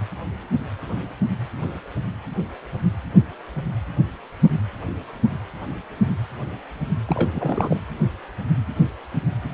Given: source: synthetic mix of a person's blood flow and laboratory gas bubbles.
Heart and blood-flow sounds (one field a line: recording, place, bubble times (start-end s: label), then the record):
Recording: Doppler ultrasound of blood flow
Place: precordium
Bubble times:
7.07-7.79 s: bubbles
From the record:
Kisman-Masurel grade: 212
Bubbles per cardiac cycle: several, 3 to 8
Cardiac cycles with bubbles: 1 to 10%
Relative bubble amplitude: moderate (0.250 to 0.450)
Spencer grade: 1 (occasional bubble signal discernible with the cardiac motion signal, with majority of cardiac periods free of bubbles)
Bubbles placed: anywhere in the cardiac cycle